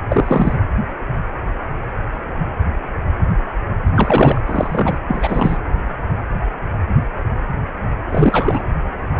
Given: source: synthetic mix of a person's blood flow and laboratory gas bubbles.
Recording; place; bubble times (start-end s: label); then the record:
Doppler ultrasound of blood flow; precordium
0.09-0.53 s: bubbles
3.94-4.41 s: bubbles
4.46-4.99 s: bubbles
5.07-5.57 s: bubbles
8.09-8.62 s: bubbles
From the record:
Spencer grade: 2 (many but less than half of the cardiac periods contain bubble signals, singularly or in groups); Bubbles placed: anywhere in the cardiac cycle